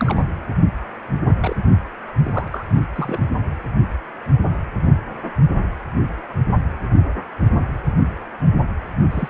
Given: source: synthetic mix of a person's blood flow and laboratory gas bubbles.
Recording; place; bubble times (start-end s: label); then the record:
Doppler ultrasound of blood flow; precordium
0.00-0.21 s: bubbles
1.26-1.36 s: bubbles
1.41-1.56 s: bubbles
2.23-2.48 s: bubbles
2.52-2.65 s: bubbles
2.95-3.19 s: bubbles
9.11-9.29 s: bubbles
From the record:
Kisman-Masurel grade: 221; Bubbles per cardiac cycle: several, 3 to 8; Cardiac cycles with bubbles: 10 to 50%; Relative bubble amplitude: barely perceptible (0.100 to 0.250); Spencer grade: 2 (many but less than half of the cardiac periods contain bubble signals, singularly or in groups); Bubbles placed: only in the low amplitude regions of the cardiac cycle